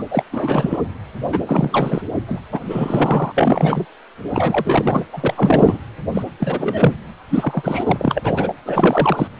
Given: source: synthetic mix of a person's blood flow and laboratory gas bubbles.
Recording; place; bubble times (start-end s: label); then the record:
Doppler ultrasound of blood flow; precordium
0.00-0.02 s: bubbles
0.11-0.23 s: bubbles
0.31-0.77 s: bubbles
1.26-1.39 s: bubbles
1.47-2.01 s: bubbles
2.26-2.41 s: bubbles
2.52-2.59 s: bubbles
2.62-3.32 s: bubbles
3.37-3.85 s: bubbles
4.33-5.06 s: bubbles
5.12-5.78 s: bubbles
6.14-6.23 s: bubbles
6.38-6.94 s: bubbles
7.29-7.84 s: bubbles
7.86-8.54 s: bubbles
8.65-9.28 s: bubbles
From the record:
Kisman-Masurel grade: 343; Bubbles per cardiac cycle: rolling drumbeat, 9 or more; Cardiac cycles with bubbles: 100%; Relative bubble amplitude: loud (0.450 to 0.775); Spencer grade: 3 (all of the cardiac periods contain showers or single bubble signals, but not dominating or overriding the cardiac motion signals); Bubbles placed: anywhere in the cardiac cycle